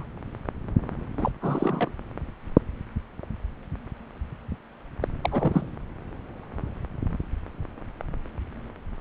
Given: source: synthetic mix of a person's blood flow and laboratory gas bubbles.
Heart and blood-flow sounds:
Doppler ultrasound of blood flow; subclavian vein
0.00-0.05 s: bubbles
1.18-1.31 s: bubbles
1.42-1.92 s: bubbles
5.01-5.08 s: bubbles
5.21-5.67 s: bubbles
From the record:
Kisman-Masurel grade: 222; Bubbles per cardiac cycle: several, 3 to 8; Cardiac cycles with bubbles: 10 to 50%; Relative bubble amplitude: moderate (0.250 to 0.450); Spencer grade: 2 (many but less than half of the cardiac periods contain bubble signals, singularly or in groups); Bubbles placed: anywhere in the cardiac cycle

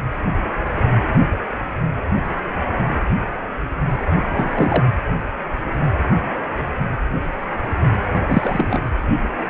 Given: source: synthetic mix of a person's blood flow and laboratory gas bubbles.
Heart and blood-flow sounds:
Doppler ultrasound of blood flow; precordium
4.15-4.83 s: bubbles
8.28-8.88 s: bubbles
From the record:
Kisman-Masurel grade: 222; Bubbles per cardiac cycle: several, 3 to 8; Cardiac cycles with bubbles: 10 to 50%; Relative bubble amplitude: moderate (0.250 to 0.450); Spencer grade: 2 (many but less than half of the cardiac periods contain bubble signals, singularly or in groups); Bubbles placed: anywhere in the cardiac cycle

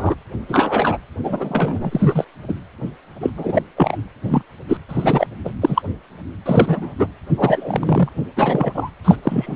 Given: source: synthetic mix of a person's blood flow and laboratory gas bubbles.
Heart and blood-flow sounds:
Doppler ultrasound of blood flow; precordium
0.00-0.15 s: bubbles
0.49-0.98 s: bubbles
1.23-2.25 s: bubbles
2.48-2.54 s: bubbles
3.20-3.30 s: bubbles
3.36-3.62 s: bubbles
3.77-3.97 s: bubbles
4.27-4.42 s: bubbles
4.69-4.77 s: bubbles
4.89-5.27 s: bubbles
5.45-5.50 s: bubbles
5.61-5.82 s: bubbles
6.46-6.94 s: bubbles
6.99-7.07 s: bubbles
7.27-8.09 s: bubbles
8.36-8.90 s: bubbles
9.04-9.16 s: bubbles
9.22-9.56 s: bubbles
From the record:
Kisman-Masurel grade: 243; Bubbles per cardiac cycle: several, 3 to 8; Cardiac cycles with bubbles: 100%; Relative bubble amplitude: loud (0.450 to 0.775); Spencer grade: 3 (all of the cardiac periods contain showers or single bubble signals, but not dominating or overriding the cardiac motion signals); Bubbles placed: anywhere in the cardiac cycle

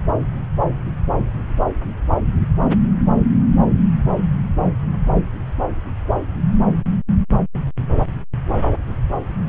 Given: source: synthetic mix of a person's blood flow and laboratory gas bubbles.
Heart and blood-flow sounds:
Doppler ultrasound of blood flow; subclavian vein
no bubbles
From the record:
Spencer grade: 0 (complete lack of bubble signals)

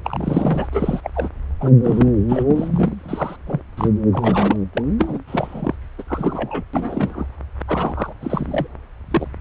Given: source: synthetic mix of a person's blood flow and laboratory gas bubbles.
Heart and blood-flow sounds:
Doppler ultrasound of blood flow; subclavian vein
0.04-0.68 s: bubbles
0.73-1.01 s: bubbles
1.04-1.10 s: bubbles
1.14-1.29 s: bubbles
1.60-1.71 s: bubbles
1.83-2.11 s: bubbles
2.29-2.43 s: bubbles
2.46-2.94 s: bubbles
2.98-3.36 s: bubbles
3.46-3.61 s: bubbles
3.77-3.90 s: bubbles
4.12-4.56 s: bubbles
4.73-4.82 s: bubbles
4.97-5.19 s: bubbles
5.27-5.75 s: bubbles
5.98-6.03 s: bubbles
6.07-6.63 s: bubbles
6.73-7.25 s: bubbles
7.67-8.13 s: bubbles
8.21-8.67 s: bubbles
9.10-9.28 s: bubbles
From the record:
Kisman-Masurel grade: 242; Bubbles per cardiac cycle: several, 3 to 8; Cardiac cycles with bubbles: 100%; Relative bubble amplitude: moderate (0.250 to 0.450); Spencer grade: 3 (all of the cardiac periods contain showers or single bubble signals, but not dominating or overriding the cardiac motion signals); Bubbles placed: anywhere in the cardiac cycle

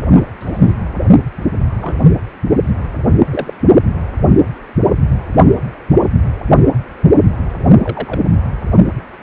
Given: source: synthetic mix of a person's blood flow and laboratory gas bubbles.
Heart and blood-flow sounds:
Doppler ultrasound of blood flow; precordium
0.14-0.24 s: bubbles
0.40-0.74 s: bubbles
1.81-1.95 s: bubbles
3.31-3.54 s: bubbles
7.84-8.20 s: bubbles
From the record:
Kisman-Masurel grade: 122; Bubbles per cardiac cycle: 1 to 2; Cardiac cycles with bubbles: 10 to 50%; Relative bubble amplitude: moderate (0.250 to 0.450); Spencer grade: 2 (many but less than half of the cardiac periods contain bubble signals, singularly or in groups); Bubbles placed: only in the low amplitude regions of the cardiac cycle

